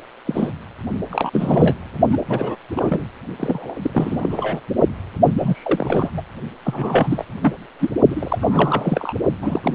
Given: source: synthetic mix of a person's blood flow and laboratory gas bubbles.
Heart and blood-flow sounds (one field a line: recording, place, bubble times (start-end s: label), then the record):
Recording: Doppler ultrasound of blood flow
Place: precordium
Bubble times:
0.26-0.52 s: bubbles
1.10-1.75 s: bubbles
2.11-2.19 s: bubbles
2.27-2.56 s: bubbles
2.75-3.05 s: bubbles
3.39-3.75 s: bubbles
3.82-4.61 s: bubbles
5.37-6.12 s: bubbles
6.17-6.21 s: bubbles
6.64-7.25 s: bubbles
7.41-7.54 s: bubbles
7.79-7.90 s: bubbles
8.10-9.12 s: bubbles
9.41-9.75 s: bubbles
From the record:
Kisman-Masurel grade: 342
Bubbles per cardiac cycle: rolling drumbeat, 9 or more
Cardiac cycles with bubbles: 100%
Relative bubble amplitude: moderate (0.250 to 0.450)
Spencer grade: 3 (all of the cardiac periods contain showers or single bubble signals, but not dominating or overriding the cardiac motion signals)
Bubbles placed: only in the low amplitude regions of the cardiac cycle